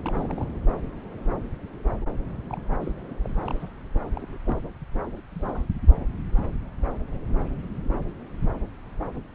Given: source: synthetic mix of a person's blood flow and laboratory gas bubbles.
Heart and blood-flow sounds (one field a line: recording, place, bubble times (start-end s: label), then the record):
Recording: Doppler ultrasound of blood flow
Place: subclavian vein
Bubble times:
0.00-0.54 s: bubbles
2.49-2.60 s: bubbles
2.80-2.92 s: bubbles
3.09-3.15 s: bubbles
3.24-3.29 s: bubbles
3.41-3.69 s: bubbles
4.04-4.38 s: bubbles
4.46-4.68 s: bubbles
5.17-5.23 s: bubbles
5.32-5.64 s: bubbles
From the record:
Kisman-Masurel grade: 221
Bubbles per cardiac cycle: several, 3 to 8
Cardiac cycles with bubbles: 10 to 50%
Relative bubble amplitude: barely perceptible (0.100 to 0.250)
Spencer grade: 2 (many but less than half of the cardiac periods contain bubble signals, singularly or in groups)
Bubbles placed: anywhere in the cardiac cycle